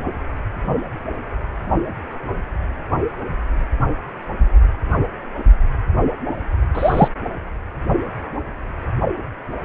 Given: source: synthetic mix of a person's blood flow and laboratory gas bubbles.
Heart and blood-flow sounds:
Doppler ultrasound of blood flow; precordium
6.75-7.08 s: bubbles
From the record:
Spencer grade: 1 (occasional bubble signal discernible with the cardiac motion signal, with majority of cardiac periods free of bubbles); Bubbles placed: only in the low amplitude regions of the cardiac cycle

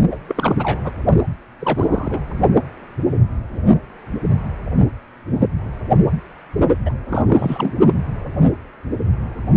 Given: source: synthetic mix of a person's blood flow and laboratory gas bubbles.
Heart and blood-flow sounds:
Doppler ultrasound of blood flow; precordium
0.11-0.18 s: bubbles
0.28-0.34 s: bubbles
0.37-0.53 s: bubbles
0.58-0.80 s: bubbles
0.84-0.91 s: bubbles
1.59-2.22 s: bubbles
6.85-6.93 s: bubbles
7.08-7.21 s: bubbles
7.27-7.72 s: bubbles
From the record:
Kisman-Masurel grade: 222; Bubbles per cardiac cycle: several, 3 to 8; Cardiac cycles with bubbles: 10 to 50%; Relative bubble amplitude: moderate (0.250 to 0.450); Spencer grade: 2 (many but less than half of the cardiac periods contain bubble signals, singularly or in groups); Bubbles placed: only in the low amplitude regions of the cardiac cycle

